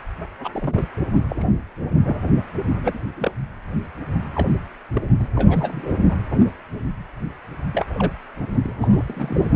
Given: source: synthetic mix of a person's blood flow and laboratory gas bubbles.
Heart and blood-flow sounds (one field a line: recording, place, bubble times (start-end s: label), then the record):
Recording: Doppler ultrasound of blood flow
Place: precordium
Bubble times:
0.43-0.49 s: bubbles
0.52-0.85 s: bubbles
1.14-1.24 s: bubbles
1.30-1.52 s: bubbles
2.05-2.22 s: bubbles
2.70-2.99 s: bubbles
3.16-3.35 s: bubbles
4.34-4.50 s: bubbles
4.93-5.01 s: bubbles
5.19-5.27 s: bubbles
5.36-5.93 s: bubbles
5.96-6.17 s: bubbles
7.72-7.86 s: bubbles
7.98-8.12 s: bubbles
8.53-8.73 s: bubbles
8.81-8.88 s: bubbles
8.92-9.53 s: bubbles
From the record:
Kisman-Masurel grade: 232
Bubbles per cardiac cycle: several, 3 to 8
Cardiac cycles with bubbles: 50 to 99%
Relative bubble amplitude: moderate (0.250 to 0.450)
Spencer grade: 3 (all of the cardiac periods contain showers or single bubble signals, but not dominating or overriding the cardiac motion signals)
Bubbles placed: anywhere in the cardiac cycle